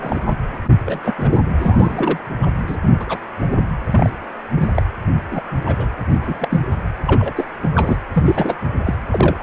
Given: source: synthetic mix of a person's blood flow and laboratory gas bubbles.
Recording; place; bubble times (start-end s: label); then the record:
Doppler ultrasound of blood flow; precordium
0.00-0.34 s: bubbles
0.86-1.13 s: bubbles
1.18-1.40 s: bubbles
1.60-2.19 s: bubbles
2.42-2.47 s: bubbles
2.67-2.77 s: bubbles
2.99-3.18 s: bubbles
3.93-4.10 s: bubbles
4.54-4.70 s: bubbles
4.75-4.83 s: bubbles
5.30-5.42 s: bubbles
5.65-5.88 s: bubbles
6.12-6.61 s: bubbles
7.06-7.33 s: bubbles
7.36-7.45 s: bubbles
7.63-7.68 s: bubbles
7.73-7.96 s: bubbles
8.13-8.55 s: bubbles
8.83-8.94 s: bubbles
9.11-9.43 s: bubbles
From the record:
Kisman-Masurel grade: 242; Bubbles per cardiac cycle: several, 3 to 8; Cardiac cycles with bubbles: 100%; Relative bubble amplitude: moderate (0.250 to 0.450); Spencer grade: 3 (all of the cardiac periods contain showers or single bubble signals, but not dominating or overriding the cardiac motion signals); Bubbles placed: anywhere in the cardiac cycle